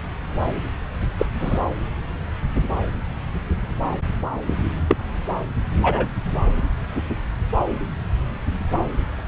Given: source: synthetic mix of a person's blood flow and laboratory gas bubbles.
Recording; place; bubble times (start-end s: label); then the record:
Doppler ultrasound of blood flow; subclavian vein
1.18-1.25 s: bubbles
1.40-1.60 s: bubbles
4.88-4.96 s: bubbles
5.81-6.08 s: bubbles
From the record:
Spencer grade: 2 (many but less than half of the cardiac periods contain bubble signals, singularly or in groups); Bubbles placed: anywhere in the cardiac cycle